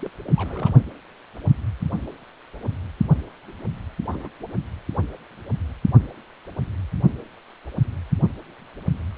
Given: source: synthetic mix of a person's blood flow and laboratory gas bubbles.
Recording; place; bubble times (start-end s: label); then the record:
Doppler ultrasound of blood flow; precordium
0.00-0.09 s: bubbles
0.25-0.73 s: bubbles
4.12-4.29 s: bubbles
From the record:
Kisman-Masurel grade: 221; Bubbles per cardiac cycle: several, 3 to 8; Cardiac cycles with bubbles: 10 to 50%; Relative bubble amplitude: barely perceptible (0.100 to 0.250); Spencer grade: 2 (many but less than half of the cardiac periods contain bubble signals, singularly or in groups); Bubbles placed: only in the low amplitude regions of the cardiac cycle